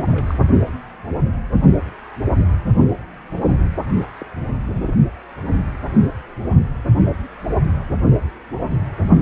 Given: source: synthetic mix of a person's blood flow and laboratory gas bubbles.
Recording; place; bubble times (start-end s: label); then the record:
Doppler ultrasound of blood flow; precordium
0.11-0.38 s: bubbles
4.19-4.26 s: bubbles
4.73-4.95 s: bubbles
From the record:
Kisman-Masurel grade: 221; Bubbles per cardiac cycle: several, 3 to 8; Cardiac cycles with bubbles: 10 to 50%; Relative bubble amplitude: barely perceptible (0.100 to 0.250); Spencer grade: 2 (many but less than half of the cardiac periods contain bubble signals, singularly or in groups); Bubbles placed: only in the low amplitude regions of the cardiac cycle